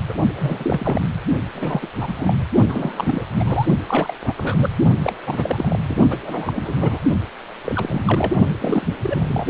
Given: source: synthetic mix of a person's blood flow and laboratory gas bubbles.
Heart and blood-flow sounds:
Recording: Doppler ultrasound of blood flow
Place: precordium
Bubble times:
0.08-0.13 s: bubbles
0.35-1.06 s: bubbles
1.54-1.88 s: bubbles
1.99-2.12 s: bubbles
2.15-2.45 s: bubbles
2.67-3.23 s: bubbles
3.36-3.66 s: bubbles
3.88-4.13 s: bubbles
4.24-4.33 s: bubbles
4.37-4.69 s: bubbles
5.03-5.14 s: bubbles
5.26-5.79 s: bubbles
5.83-5.97 s: bubbles
6.10-6.18 s: bubbles
6.22-7.00 s: bubbles
7.64-8.37 s: bubbles
8.46-8.52 s: bubbles
8.56-8.96 s: bubbles
9.02-9.47 s: bubbles
From the record:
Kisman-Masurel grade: 342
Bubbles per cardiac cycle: rolling drumbeat, 9 or more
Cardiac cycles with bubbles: 100%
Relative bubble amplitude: moderate (0.250 to 0.450)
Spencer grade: 3 (all of the cardiac periods contain showers or single bubble signals, but not dominating or overriding the cardiac motion signals)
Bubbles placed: only in the low amplitude regions of the cardiac cycle

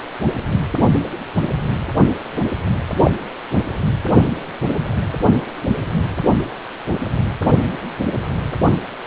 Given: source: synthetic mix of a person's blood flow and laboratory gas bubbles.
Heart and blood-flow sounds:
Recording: Doppler ultrasound of blood flow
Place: precordium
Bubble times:
3.04-3.11 s: bubbles
From the record:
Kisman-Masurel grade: 113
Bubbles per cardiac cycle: 1 to 2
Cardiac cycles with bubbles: 1 to 10%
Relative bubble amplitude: loud (0.450 to 0.775)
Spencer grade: 1 (occasional bubble signal discernible with the cardiac motion signal, with majority of cardiac periods free of bubbles)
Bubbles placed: anywhere in the cardiac cycle

